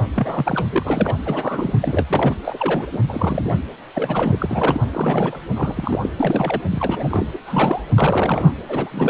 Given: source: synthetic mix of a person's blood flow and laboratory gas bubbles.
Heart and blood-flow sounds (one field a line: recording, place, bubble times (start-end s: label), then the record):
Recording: Doppler ultrasound of blood flow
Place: precordium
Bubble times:
0.00-0.06 s: bubbles
0.16-1.16 s: bubbles
1.26-1.74 s: bubbles
1.82-2.35 s: bubbles
2.44-2.87 s: bubbles
2.92-2.99 s: bubbles
3.08-3.60 s: bubbles
3.95-4.37 s: bubbles
4.39-4.80 s: bubbles
4.93-5.41 s: bubbles
5.55-5.99 s: bubbles
6.03-6.09 s: bubbles
6.20-6.62 s: bubbles
6.71-7.27 s: bubbles
7.32-7.38 s: bubbles
7.46-7.82 s: bubbles
7.96-8.52 s: bubbles
8.68-9.10 s: bubbles
From the record:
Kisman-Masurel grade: 342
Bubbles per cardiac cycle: rolling drumbeat, 9 or more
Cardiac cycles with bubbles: 100%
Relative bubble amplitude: moderate (0.250 to 0.450)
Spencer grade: 3 (all of the cardiac periods contain showers or single bubble signals, but not dominating or overriding the cardiac motion signals)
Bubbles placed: anywhere in the cardiac cycle